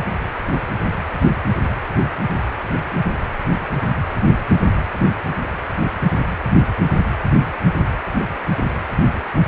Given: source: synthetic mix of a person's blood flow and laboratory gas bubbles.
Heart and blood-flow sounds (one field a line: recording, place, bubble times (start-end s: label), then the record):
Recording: Doppler ultrasound of blood flow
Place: precordium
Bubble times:
no bubbles
From the record:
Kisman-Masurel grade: 000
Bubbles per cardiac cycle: 0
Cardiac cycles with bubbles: 0%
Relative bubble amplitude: no bubbles discernible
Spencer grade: 0 (complete lack of bubble signals)